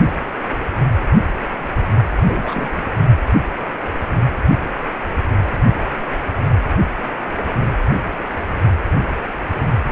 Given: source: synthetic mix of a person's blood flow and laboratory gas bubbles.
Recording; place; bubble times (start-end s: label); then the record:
Doppler ultrasound of blood flow; precordium
2.16-2.69 s: bubbles
2.72-2.82 s: bubbles
From the record:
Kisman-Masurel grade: 212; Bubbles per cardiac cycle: several, 3 to 8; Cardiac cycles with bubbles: 1 to 10%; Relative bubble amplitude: moderate (0.250 to 0.450); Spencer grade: 1 (occasional bubble signal discernible with the cardiac motion signal, with majority of cardiac periods free of bubbles); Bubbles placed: anywhere in the cardiac cycle